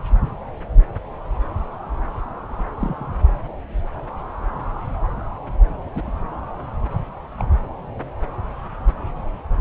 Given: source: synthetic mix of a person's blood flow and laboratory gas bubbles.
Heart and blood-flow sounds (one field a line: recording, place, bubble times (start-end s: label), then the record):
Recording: Doppler ultrasound of blood flow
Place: subclavian vein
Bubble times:
2.80-3.06 s: bubbles
5.95-6.03 s: bubbles
7.38-7.48 s: bubbles
From the record:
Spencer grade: 2 (many but less than half of the cardiac periods contain bubble signals, singularly or in groups)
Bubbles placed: anywhere in the cardiac cycle